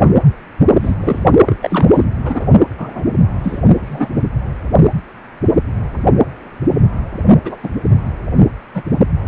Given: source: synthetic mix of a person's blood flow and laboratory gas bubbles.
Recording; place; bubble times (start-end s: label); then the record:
Doppler ultrasound of blood flow; precordium
0.80-0.95 s: bubbles
1.01-1.23 s: bubbles
1.46-1.57 s: bubbles
1.62-1.86 s: bubbles
1.94-2.06 s: bubbles
2.25-2.45 s: bubbles
2.78-3.04 s: bubbles
3.43-3.58 s: bubbles
3.71-4.08 s: bubbles
4.16-4.23 s: bubbles
7.45-7.56 s: bubbles
7.63-7.69 s: bubbles
8.74-8.83 s: bubbles
From the record:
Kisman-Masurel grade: 233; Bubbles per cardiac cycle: several, 3 to 8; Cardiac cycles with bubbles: 50 to 99%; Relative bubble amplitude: loud (0.450 to 0.775); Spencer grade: 3 (all of the cardiac periods contain showers or single bubble signals, but not dominating or overriding the cardiac motion signals); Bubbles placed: only in the low amplitude regions of the cardiac cycle